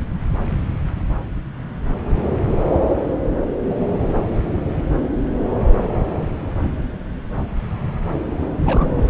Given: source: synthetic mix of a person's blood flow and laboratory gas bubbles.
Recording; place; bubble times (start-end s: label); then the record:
Doppler ultrasound of blood flow; subclavian vein
8.63-8.90 s: bubbles
8.95-9.07 s: bubbles
From the record:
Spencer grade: 1 (occasional bubble signal discernible with the cardiac motion signal, with majority of cardiac periods free of bubbles); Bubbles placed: anywhere in the cardiac cycle